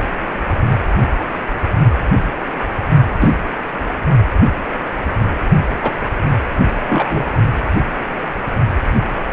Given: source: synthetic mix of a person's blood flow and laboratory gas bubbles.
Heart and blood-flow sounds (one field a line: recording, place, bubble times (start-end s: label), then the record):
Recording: Doppler ultrasound of blood flow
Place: precordium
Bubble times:
3.20-3.34 s: bubbles
5.83-5.91 s: bubbles
6.88-7.25 s: bubbles
From the record:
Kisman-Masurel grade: 123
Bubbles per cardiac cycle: 1 to 2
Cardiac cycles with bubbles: 10 to 50%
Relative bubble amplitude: loud (0.450 to 0.775)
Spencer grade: 2 (many but less than half of the cardiac periods contain bubble signals, singularly or in groups)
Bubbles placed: only in the low amplitude regions of the cardiac cycle